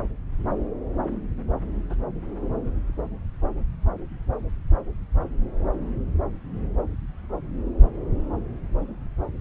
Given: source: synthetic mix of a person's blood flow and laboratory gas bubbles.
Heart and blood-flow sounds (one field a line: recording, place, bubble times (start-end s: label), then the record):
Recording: Doppler ultrasound of blood flow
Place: subclavian vein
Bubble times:
1.90-1.95 s: bubbles
From the record:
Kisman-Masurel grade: 111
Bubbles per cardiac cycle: 1 to 2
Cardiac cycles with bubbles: 1 to 10%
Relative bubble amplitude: barely perceptible (0.100 to 0.250)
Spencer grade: 1 (occasional bubble signal discernible with the cardiac motion signal, with majority of cardiac periods free of bubbles)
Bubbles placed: anywhere in the cardiac cycle